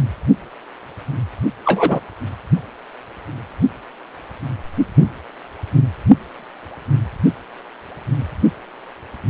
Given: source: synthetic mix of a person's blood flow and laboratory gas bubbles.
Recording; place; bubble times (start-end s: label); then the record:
Doppler ultrasound of blood flow; precordium
1.65-2.00 s: bubbles
From the record:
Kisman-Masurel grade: 123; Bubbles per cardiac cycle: 1 to 2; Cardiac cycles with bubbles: 10 to 50%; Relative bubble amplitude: loud (0.450 to 0.775); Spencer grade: 2 (many but less than half of the cardiac periods contain bubble signals, singularly or in groups); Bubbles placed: anywhere in the cardiac cycle